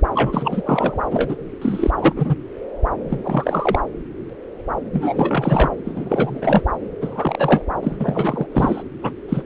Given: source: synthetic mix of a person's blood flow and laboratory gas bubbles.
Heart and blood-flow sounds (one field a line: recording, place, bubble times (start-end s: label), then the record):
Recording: Doppler ultrasound of blood flow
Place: subclavian vein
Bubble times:
0.14-0.62 s: bubbles
0.65-1.03 s: bubbles
1.11-1.36 s: bubbles
1.61-1.91 s: bubbles
1.97-2.13 s: bubbles
2.16-2.35 s: bubbles
3.03-3.79 s: bubbles
4.93-5.69 s: bubbles
5.85-6.62 s: bubbles
7.01-7.62 s: bubbles
7.83-8.47 s: bubbles
8.52-8.83 s: bubbles
9.02-9.13 s: bubbles
9.29-9.44 s: bubbles
From the record:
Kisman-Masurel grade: 333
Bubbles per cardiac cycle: rolling drumbeat, 9 or more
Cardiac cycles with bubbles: 50 to 99%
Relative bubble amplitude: loud (0.450 to 0.775)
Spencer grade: 3 (all of the cardiac periods contain showers or single bubble signals, but not dominating or overriding the cardiac motion signals)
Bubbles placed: anywhere in the cardiac cycle